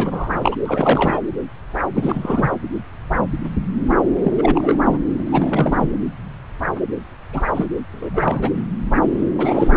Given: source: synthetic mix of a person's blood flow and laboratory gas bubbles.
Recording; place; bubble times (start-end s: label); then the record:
Doppler ultrasound of blood flow; subclavian vein
0.00-0.56 s: bubbles
0.66-1.19 s: bubbles
1.94-2.50 s: bubbles
4.22-4.32 s: bubbles
4.38-4.98 s: bubbles
5.17-5.89 s: bubbles
7.33-7.46 s: bubbles
7.54-7.68 s: bubbles
7.92-8.49 s: bubbles
8.55-8.66 s: bubbles
9.38-9.76 s: bubbles
From the record:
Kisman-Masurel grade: 332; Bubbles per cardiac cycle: rolling drumbeat, 9 or more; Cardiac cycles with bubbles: 50 to 99%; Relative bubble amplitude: moderate (0.250 to 0.450); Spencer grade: 3 (all of the cardiac periods contain showers or single bubble signals, but not dominating or overriding the cardiac motion signals); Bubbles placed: anywhere in the cardiac cycle